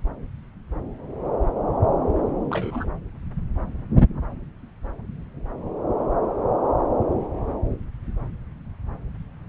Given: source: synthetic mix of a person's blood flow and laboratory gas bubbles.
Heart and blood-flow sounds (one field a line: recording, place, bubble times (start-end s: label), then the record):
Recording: Doppler ultrasound of blood flow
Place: subclavian vein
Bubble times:
2.50-2.88 s: bubbles
From the record:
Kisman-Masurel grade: 113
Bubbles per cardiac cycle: 1 to 2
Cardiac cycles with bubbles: 1 to 10%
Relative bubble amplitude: loud (0.450 to 0.775)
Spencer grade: 1 (occasional bubble signal discernible with the cardiac motion signal, with majority of cardiac periods free of bubbles)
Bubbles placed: anywhere in the cardiac cycle